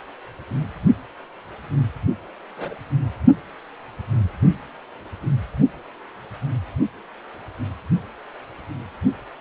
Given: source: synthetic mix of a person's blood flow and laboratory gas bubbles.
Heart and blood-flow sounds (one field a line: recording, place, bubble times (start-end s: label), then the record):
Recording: Doppler ultrasound of blood flow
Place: precordium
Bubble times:
2.56-2.76 s: bubbles
From the record:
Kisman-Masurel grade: 111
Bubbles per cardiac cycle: 1 to 2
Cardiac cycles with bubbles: 1 to 10%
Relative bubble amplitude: barely perceptible (0.100 to 0.250)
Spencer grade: 1 (occasional bubble signal discernible with the cardiac motion signal, with majority of cardiac periods free of bubbles)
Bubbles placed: only in the low amplitude regions of the cardiac cycle